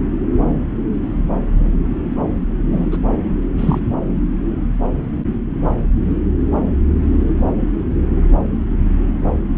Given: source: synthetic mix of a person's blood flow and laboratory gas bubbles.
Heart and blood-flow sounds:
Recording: Doppler ultrasound of blood flow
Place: subclavian vein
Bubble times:
2.72-2.97 s: bubbles
3.57-3.80 s: bubbles
From the record:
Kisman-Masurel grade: 213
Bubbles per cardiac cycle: several, 3 to 8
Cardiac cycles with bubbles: 1 to 10%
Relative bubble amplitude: loud (0.450 to 0.775)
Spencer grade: 1 (occasional bubble signal discernible with the cardiac motion signal, with majority of cardiac periods free of bubbles)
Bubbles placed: anywhere in the cardiac cycle

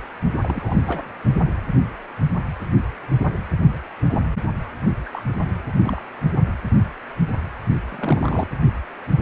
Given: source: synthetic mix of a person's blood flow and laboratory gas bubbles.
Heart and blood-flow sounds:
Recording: Doppler ultrasound of blood flow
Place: precordium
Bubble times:
0.41-1.02 s: bubbles
5.06-5.10 s: bubbles
5.12-5.20 s: bubbles
5.83-6.02 s: bubbles
7.88-8.47 s: bubbles
From the record:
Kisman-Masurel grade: 221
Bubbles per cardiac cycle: several, 3 to 8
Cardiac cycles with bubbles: 10 to 50%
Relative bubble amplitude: barely perceptible (0.100 to 0.250)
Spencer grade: 2 (many but less than half of the cardiac periods contain bubble signals, singularly or in groups)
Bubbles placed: only in the low amplitude regions of the cardiac cycle

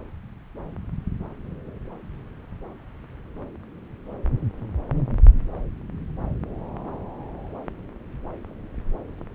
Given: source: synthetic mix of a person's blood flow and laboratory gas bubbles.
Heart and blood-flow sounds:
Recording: Doppler ultrasound of blood flow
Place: subclavian vein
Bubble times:
no bubbles
From the record:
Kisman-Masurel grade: 000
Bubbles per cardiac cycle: 0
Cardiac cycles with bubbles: 0%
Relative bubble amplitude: no bubbles discernible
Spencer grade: 0 (complete lack of bubble signals)

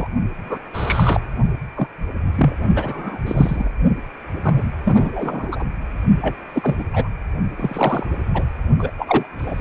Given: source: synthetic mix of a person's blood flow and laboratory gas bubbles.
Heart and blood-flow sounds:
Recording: Doppler ultrasound of blood flow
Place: precordium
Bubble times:
0.00-0.08 s: bubbles
0.43-0.58 s: bubbles
0.73-1.21 s: bubbles
1.75-1.88 s: bubbles
2.36-2.55 s: bubbles
2.72-3.18 s: bubbles
3.25-3.69 s: bubbles
4.44-4.64 s: bubbles
4.85-5.65 s: bubbles
6.21-6.36 s: bubbles
6.54-6.85 s: bubbles
6.93-7.08 s: bubbles
7.57-8.05 s: bubbles
8.34-8.46 s: bubbles
8.79-8.93 s: bubbles
8.98-9.26 s: bubbles
9.38-9.61 s: bubbles
From the record:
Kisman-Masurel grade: 243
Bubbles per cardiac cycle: several, 3 to 8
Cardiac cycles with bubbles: 100%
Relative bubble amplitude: loud (0.450 to 0.775)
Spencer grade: 3 (all of the cardiac periods contain showers or single bubble signals, but not dominating or overriding the cardiac motion signals)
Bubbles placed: only in the low amplitude regions of the cardiac cycle

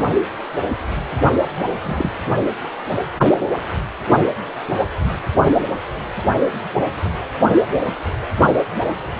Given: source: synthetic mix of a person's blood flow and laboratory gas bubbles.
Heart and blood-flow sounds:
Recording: Doppler ultrasound of blood flow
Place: precordium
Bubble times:
1.83-2.12 s: bubbles
From the record:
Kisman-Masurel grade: 112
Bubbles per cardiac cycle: 1 to 2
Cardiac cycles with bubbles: 1 to 10%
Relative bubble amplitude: moderate (0.250 to 0.450)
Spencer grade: 1 (occasional bubble signal discernible with the cardiac motion signal, with majority of cardiac periods free of bubbles)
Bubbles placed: anywhere in the cardiac cycle

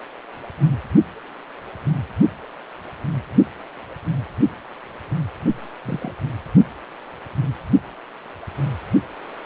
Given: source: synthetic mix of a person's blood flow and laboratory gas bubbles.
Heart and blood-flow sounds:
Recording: Doppler ultrasound of blood flow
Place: precordium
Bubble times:
5.84-6.14 s: bubbles
From the record:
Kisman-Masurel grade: 111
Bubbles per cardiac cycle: 1 to 2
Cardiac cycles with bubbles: 1 to 10%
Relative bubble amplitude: barely perceptible (0.100 to 0.250)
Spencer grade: 1 (occasional bubble signal discernible with the cardiac motion signal, with majority of cardiac periods free of bubbles)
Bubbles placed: only in the low amplitude regions of the cardiac cycle

